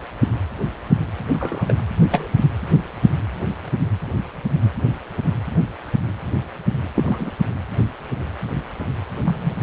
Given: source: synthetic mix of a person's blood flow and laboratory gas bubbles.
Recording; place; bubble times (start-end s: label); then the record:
Doppler ultrasound of blood flow; precordium
1.33-1.75 s: bubbles
2.10-2.33 s: bubbles
6.95-7.31 s: bubbles
9.25-9.54 s: bubbles
From the record:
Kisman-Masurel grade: 122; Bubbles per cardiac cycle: 1 to 2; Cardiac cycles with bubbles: 10 to 50%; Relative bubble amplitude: moderate (0.250 to 0.450); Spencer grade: 2 (many but less than half of the cardiac periods contain bubble signals, singularly or in groups); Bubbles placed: anywhere in the cardiac cycle